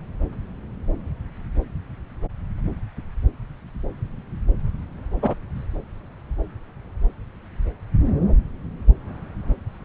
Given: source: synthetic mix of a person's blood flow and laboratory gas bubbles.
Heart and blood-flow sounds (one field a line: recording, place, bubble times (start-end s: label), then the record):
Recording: Doppler ultrasound of blood flow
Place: subclavian vein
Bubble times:
5.22-5.34 s: bubbles
From the record:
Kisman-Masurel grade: 113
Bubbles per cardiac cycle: 1 to 2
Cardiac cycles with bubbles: 1 to 10%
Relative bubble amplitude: loud (0.450 to 0.775)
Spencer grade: 1 (occasional bubble signal discernible with the cardiac motion signal, with majority of cardiac periods free of bubbles)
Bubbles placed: anywhere in the cardiac cycle